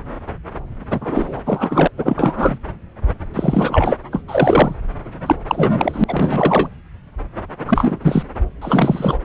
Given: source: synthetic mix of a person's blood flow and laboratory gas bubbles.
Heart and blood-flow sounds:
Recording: Doppler ultrasound of blood flow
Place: subclavian vein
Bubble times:
0.90-1.42 s: bubbles
1.46-1.88 s: bubbles
1.97-2.58 s: bubbles
3.34-3.97 s: bubbles
4.12-4.22 s: bubbles
4.28-4.75 s: bubbles
5.26-5.36 s: bubbles
5.47-6.04 s: bubbles
6.08-6.69 s: bubbles
7.67-8.23 s: bubbles
8.62-9.18 s: bubbles
From the record:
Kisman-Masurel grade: 333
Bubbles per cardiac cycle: rolling drumbeat, 9 or more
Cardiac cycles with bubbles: 50 to 99%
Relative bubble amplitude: loud (0.450 to 0.775)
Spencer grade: 3 (all of the cardiac periods contain showers or single bubble signals, but not dominating or overriding the cardiac motion signals)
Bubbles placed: anywhere in the cardiac cycle

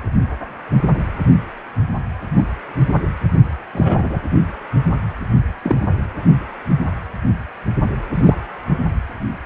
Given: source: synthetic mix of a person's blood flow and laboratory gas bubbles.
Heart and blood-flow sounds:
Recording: Doppler ultrasound of blood flow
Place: precordium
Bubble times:
2.36-2.43 s: bubbles
3.72-4.21 s: bubbles
5.63-5.85 s: bubbles
8.15-8.36 s: bubbles
From the record:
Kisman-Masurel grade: 123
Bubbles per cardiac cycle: 1 to 2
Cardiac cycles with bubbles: 10 to 50%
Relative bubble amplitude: loud (0.450 to 0.775)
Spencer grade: 2 (many but less than half of the cardiac periods contain bubble signals, singularly or in groups)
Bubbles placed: anywhere in the cardiac cycle

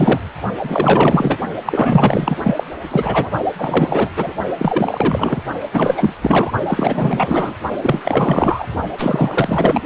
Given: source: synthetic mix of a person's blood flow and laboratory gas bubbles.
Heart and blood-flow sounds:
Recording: Doppler ultrasound of blood flow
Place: precordium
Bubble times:
0.00-0.21 s: bubbles
0.63-1.38 s: bubbles
1.66-2.36 s: bubbles
2.44-2.63 s: bubbles
2.90-3.30 s: bubbles
3.58-4.09 s: bubbles
4.16-4.33 s: bubbles
4.58-5.42 s: bubbles
5.73-6.15 s: bubbles
6.21-6.51 s: bubbles
6.67-7.55 s: bubbles
7.81-8.68 s: bubbles
8.97-9.81 s: bubbles
From the record:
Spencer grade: 4 (maximum detectable bubble signal sounding continuously throughout systole and diastole of every cardiac period, and overriding the amplitude of the normal cardiac signals)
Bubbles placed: only in the low amplitude regions of the cardiac cycle

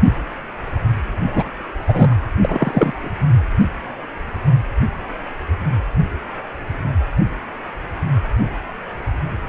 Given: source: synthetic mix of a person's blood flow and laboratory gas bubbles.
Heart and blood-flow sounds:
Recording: Doppler ultrasound of blood flow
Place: precordium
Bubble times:
1.33-1.49 s: bubbles
1.88-2.16 s: bubbles
2.40-3.11 s: bubbles
9.46-9.49 s: bubbles
From the record:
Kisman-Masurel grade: 223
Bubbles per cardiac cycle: several, 3 to 8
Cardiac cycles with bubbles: 10 to 50%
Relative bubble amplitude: loud (0.450 to 0.775)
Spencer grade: 2 (many but less than half of the cardiac periods contain bubble signals, singularly or in groups)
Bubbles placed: anywhere in the cardiac cycle

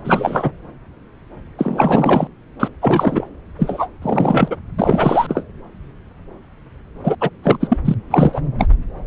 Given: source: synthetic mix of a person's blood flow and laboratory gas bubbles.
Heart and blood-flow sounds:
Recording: Doppler ultrasound of blood flow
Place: subclavian vein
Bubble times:
0.04-0.50 s: bubbles
1.58-2.27 s: bubbles
2.59-2.69 s: bubbles
2.81-3.27 s: bubbles
3.58-3.88 s: bubbles
4.02-4.57 s: bubbles
4.78-5.43 s: bubbles
7.04-7.16 s: bubbles
7.21-7.29 s: bubbles
7.43-7.56 s: bubbles
7.60-7.77 s: bubbles
7.85-7.94 s: bubbles
8.10-8.41 s: bubbles
8.59-8.67 s: bubbles
From the record:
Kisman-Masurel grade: 333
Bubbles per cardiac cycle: rolling drumbeat, 9 or more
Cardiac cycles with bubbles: 50 to 99%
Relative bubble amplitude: loud (0.450 to 0.775)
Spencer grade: 3 (all of the cardiac periods contain showers or single bubble signals, but not dominating or overriding the cardiac motion signals)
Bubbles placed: anywhere in the cardiac cycle

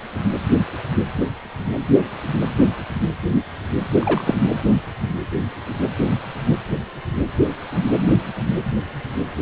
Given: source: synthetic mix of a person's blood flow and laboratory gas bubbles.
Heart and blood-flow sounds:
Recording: Doppler ultrasound of blood flow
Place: precordium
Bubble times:
3.93-4.34 s: bubbles
From the record:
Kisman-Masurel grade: 213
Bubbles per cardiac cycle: several, 3 to 8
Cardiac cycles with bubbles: 1 to 10%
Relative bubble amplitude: loud (0.450 to 0.775)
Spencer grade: 1 (occasional bubble signal discernible with the cardiac motion signal, with majority of cardiac periods free of bubbles)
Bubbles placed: anywhere in the cardiac cycle

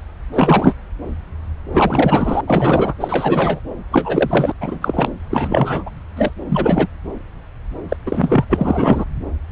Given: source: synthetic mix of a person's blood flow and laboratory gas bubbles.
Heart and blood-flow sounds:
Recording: Doppler ultrasound of blood flow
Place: subclavian vein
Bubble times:
0.34-0.75 s: bubbles
1.71-2.41 s: bubbles
2.47-2.94 s: bubbles
3.00-3.60 s: bubbles
3.91-4.52 s: bubbles
4.60-5.12 s: bubbles
5.29-5.83 s: bubbles
5.85-5.90 s: bubbles
6.16-6.31 s: bubbles
6.48-6.87 s: bubbles
7.88-7.96 s: bubbles
8.06-8.45 s: bubbles
8.49-9.04 s: bubbles
From the record:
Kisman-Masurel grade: 333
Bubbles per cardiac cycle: rolling drumbeat, 9 or more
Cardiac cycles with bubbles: 50 to 99%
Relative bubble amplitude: loud (0.450 to 0.775)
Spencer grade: 3 (all of the cardiac periods contain showers or single bubble signals, but not dominating or overriding the cardiac motion signals)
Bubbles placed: anywhere in the cardiac cycle

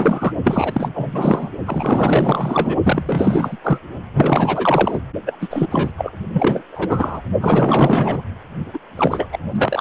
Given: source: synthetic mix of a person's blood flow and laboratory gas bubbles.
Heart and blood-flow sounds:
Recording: Doppler ultrasound of blood flow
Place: precordium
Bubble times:
0.00-0.32 s: bubbles
0.44-0.91 s: bubbles
0.94-1.50 s: bubbles
1.66-2.77 s: bubbles
2.83-3.56 s: bubbles
3.64-3.79 s: bubbles
4.13-4.99 s: bubbles
5.26-5.38 s: bubbles
5.41-5.67 s: bubbles
5.71-5.92 s: bubbles
5.97-6.12 s: bubbles
6.33-6.62 s: bubbles
6.71-7.21 s: bubbles
7.41-8.22 s: bubbles
8.73-8.79 s: bubbles
8.95-9.38 s: bubbles
9.52-9.81 s: bubbles
From the record:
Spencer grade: 4 (maximum detectable bubble signal sounding continuously throughout systole and diastole of every cardiac period, and overriding the amplitude of the normal cardiac signals)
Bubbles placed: only in the low amplitude regions of the cardiac cycle

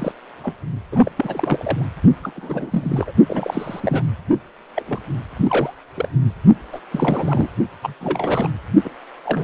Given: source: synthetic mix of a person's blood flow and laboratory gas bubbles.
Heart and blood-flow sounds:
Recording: Doppler ultrasound of blood flow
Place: precordium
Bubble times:
0.00-0.12 s: bubbles
0.43-0.54 s: bubbles
0.92-1.09 s: bubbles
1.16-1.86 s: bubbles
2.23-2.31 s: bubbles
2.35-3.12 s: bubbles
3.26-4.02 s: bubbles
4.75-4.83 s: bubbles
4.88-5.00 s: bubbles
5.43-5.73 s: bubbles
5.96-6.08 s: bubbles
6.72-6.80 s: bubbles
6.90-7.49 s: bubbles
7.82-7.94 s: bubbles
8.00-8.48 s: bubbles
8.84-8.90 s: bubbles
9.24-9.44 s: bubbles
From the record:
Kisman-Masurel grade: 242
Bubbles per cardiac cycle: several, 3 to 8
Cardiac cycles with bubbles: 100%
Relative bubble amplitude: moderate (0.250 to 0.450)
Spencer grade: 3 (all of the cardiac periods contain showers or single bubble signals, but not dominating or overriding the cardiac motion signals)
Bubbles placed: only in the low amplitude regions of the cardiac cycle

